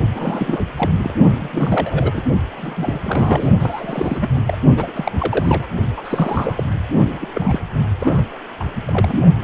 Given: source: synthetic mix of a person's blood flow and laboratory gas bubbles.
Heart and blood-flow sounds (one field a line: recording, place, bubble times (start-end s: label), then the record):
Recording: Doppler ultrasound of blood flow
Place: precordium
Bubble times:
0.14-0.64 s: bubbles
0.76-0.91 s: bubbles
1.04-1.14 s: bubbles
1.41-2.24 s: bubbles
2.57-3.01 s: bubbles
3.04-3.48 s: bubbles
3.59-4.30 s: bubbles
4.34-4.42 s: bubbles
4.46-4.56 s: bubbles
4.77-5.11 s: bubbles
5.18-5.67 s: bubbles
5.97-6.63 s: bubbles
7.20-7.27 s: bubbles
7.34-7.59 s: bubbles
7.99-8.25 s: bubbles
8.59-8.64 s: bubbles
8.86-9.21 s: bubbles
9.42-9.44 s: bubbles
From the record:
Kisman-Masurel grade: 342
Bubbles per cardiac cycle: rolling drumbeat, 9 or more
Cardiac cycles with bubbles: 100%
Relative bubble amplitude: moderate (0.250 to 0.450)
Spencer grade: 3 (all of the cardiac periods contain showers or single bubble signals, but not dominating or overriding the cardiac motion signals)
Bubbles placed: only in the low amplitude regions of the cardiac cycle